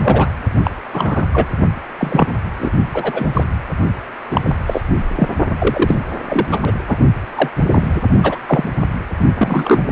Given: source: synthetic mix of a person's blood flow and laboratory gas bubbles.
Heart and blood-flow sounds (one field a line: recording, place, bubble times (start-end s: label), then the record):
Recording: Doppler ultrasound of blood flow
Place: precordium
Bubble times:
0.00-0.30 s: bubbles
0.63-0.71 s: bubbles
0.93-1.23 s: bubbles
1.31-1.47 s: bubbles
1.98-2.31 s: bubbles
2.59-2.69 s: bubbles
2.92-3.44 s: bubbles
4.30-4.56 s: bubbles
4.66-4.81 s: bubbles
5.15-5.28 s: bubbles
5.59-6.04 s: bubbles
6.25-6.74 s: bubbles
6.88-6.97 s: bubbles
7.35-7.49 s: bubbles
7.58-7.66 s: bubbles
7.72-8.02 s: bubbles
8.22-8.38 s: bubbles
8.47-8.69 s: bubbles
9.36-9.80 s: bubbles
From the record:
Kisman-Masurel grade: 243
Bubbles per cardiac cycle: several, 3 to 8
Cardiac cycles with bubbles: 100%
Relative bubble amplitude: loud (0.450 to 0.775)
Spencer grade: 3 (all of the cardiac periods contain showers or single bubble signals, but not dominating or overriding the cardiac motion signals)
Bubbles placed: only in the low amplitude regions of the cardiac cycle